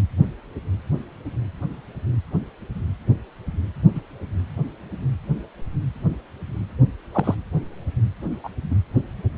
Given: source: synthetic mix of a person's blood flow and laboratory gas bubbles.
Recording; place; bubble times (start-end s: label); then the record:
Doppler ultrasound of blood flow; precordium
3.95-4.01 s: bubbles
7.12-7.35 s: bubbles
8.43-8.48 s: bubbles
8.71-8.75 s: bubbles
From the record:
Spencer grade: 2 (many but less than half of the cardiac periods contain bubble signals, singularly or in groups); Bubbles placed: anywhere in the cardiac cycle